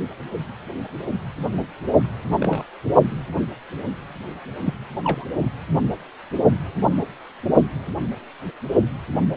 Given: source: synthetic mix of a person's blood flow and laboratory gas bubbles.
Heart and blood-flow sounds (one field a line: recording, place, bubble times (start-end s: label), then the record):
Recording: Doppler ultrasound of blood flow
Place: precordium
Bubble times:
2.40-2.63 s: bubbles
4.64-4.74 s: bubbles
5.04-5.25 s: bubbles
From the record:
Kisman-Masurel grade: 121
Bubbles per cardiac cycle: 1 to 2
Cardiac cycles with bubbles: 10 to 50%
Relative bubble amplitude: barely perceptible (0.100 to 0.250)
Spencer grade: 2 (many but less than half of the cardiac periods contain bubble signals, singularly or in groups)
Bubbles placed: only in the low amplitude regions of the cardiac cycle